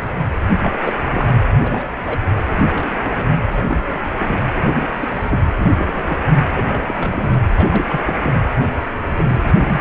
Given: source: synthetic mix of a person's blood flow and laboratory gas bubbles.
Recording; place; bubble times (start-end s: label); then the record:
Doppler ultrasound of blood flow; precordium
0.00-0.23 s: bubbles
0.58-0.76 s: bubbles
0.83-0.94 s: bubbles
1.11-1.28 s: bubbles
1.58-1.90 s: bubbles
2.04-2.19 s: bubbles
2.46-2.66 s: bubbles
2.72-3.26 s: bubbles
3.48-3.62 s: bubbles
3.67-3.77 s: bubbles
3.85-4.08 s: bubbles
4.18-4.38 s: bubbles
4.56-4.66 s: bubbles
4.95-5.41 s: bubbles
5.55-6.19 s: bubbles
6.53-6.82 s: bubbles
6.87-7.34 s: bubbles
7.57-7.85 s: bubbles
7.89-8.14 s: bubbles
8.23-8.32 s: bubbles
9.16-9.34 s: bubbles
9.42-9.81 s: bubbles
From the record:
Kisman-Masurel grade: 242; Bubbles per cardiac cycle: several, 3 to 8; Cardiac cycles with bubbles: 100%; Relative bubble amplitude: moderate (0.250 to 0.450); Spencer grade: 3 (all of the cardiac periods contain showers or single bubble signals, but not dominating or overriding the cardiac motion signals); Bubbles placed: anywhere in the cardiac cycle